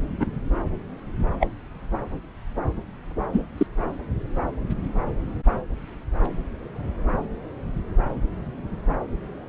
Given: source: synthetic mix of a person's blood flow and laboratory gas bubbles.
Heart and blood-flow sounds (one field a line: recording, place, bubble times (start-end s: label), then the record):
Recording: Doppler ultrasound of blood flow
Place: subclavian vein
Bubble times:
0.20-0.26 s: bubbles
1.40-1.48 s: bubbles
3.33-3.42 s: bubbles
3.58-3.67 s: bubbles
From the record:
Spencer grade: 2 (many but less than half of the cardiac periods contain bubble signals, singularly or in groups)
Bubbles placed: anywhere in the cardiac cycle